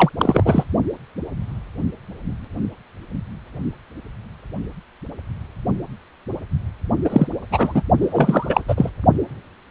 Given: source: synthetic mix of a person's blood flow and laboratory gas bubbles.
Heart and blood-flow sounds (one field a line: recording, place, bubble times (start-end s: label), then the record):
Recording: Doppler ultrasound of blood flow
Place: precordium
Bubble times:
0.00-0.09 s: bubbles
0.18-0.65 s: bubbles
7.04-7.27 s: bubbles
7.50-7.82 s: bubbles
8.00-8.63 s: bubbles
8.68-8.90 s: bubbles
From the record:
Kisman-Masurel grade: 223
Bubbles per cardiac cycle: several, 3 to 8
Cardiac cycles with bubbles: 10 to 50%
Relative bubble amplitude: loud (0.450 to 0.775)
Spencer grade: 2 (many but less than half of the cardiac periods contain bubble signals, singularly or in groups)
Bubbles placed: only in the low amplitude regions of the cardiac cycle